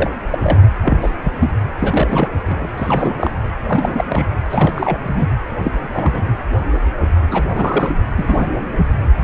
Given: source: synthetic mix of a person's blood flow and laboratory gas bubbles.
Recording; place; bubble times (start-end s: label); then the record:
Doppler ultrasound of blood flow; precordium
0.00-0.10 s: bubbles
0.32-0.39 s: bubbles
0.41-0.58 s: bubbles
0.83-1.10 s: bubbles
1.24-1.33 s: bubbles
1.40-1.51 s: bubbles
1.79-2.30 s: bubbles
2.46-2.68 s: bubbles
2.77-3.31 s: bubbles
3.63-4.04 s: bubbles
4.09-4.25 s: bubbles
4.50-4.98 s: bubbles
5.03-5.29 s: bubbles
5.63-6.33 s: bubbles
7.30-7.42 s: bubbles
7.53-7.92 s: bubbles
8.16-8.48 s: bubbles
8.77-8.86 s: bubbles
From the record:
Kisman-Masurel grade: 242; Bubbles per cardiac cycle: several, 3 to 8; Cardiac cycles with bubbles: 100%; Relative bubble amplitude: moderate (0.250 to 0.450); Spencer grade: 3 (all of the cardiac periods contain showers or single bubble signals, but not dominating or overriding the cardiac motion signals); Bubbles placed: anywhere in the cardiac cycle